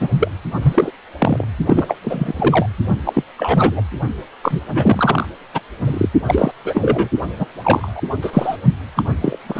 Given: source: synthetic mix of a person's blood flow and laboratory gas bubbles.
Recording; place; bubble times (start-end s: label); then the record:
Doppler ultrasound of blood flow; precordium
0.00-0.09 s: bubbles
0.20-0.29 s: bubbles
0.62-0.90 s: bubbles
1.19-1.44 s: bubbles
1.65-1.96 s: bubbles
2.02-2.66 s: bubbles
3.05-3.23 s: bubbles
3.37-3.81 s: bubbles
4.42-4.60 s: bubbles
4.75-5.26 s: bubbles
5.54-5.60 s: bubbles
5.83-6.09 s: bubbles
6.25-6.51 s: bubbles
6.64-7.08 s: bubbles
7.38-7.46 s: bubbles
7.63-8.01 s: bubbles
8.22-8.56 s: bubbles
8.96-9.03 s: bubbles
9.21-9.37 s: bubbles
9.47-9.60 s: bubbles
From the record:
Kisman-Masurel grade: 233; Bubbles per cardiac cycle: several, 3 to 8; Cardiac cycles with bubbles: 50 to 99%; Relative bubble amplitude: loud (0.450 to 0.775); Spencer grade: 3 (all of the cardiac periods contain showers or single bubble signals, but not dominating or overriding the cardiac motion signals); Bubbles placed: only in the low amplitude regions of the cardiac cycle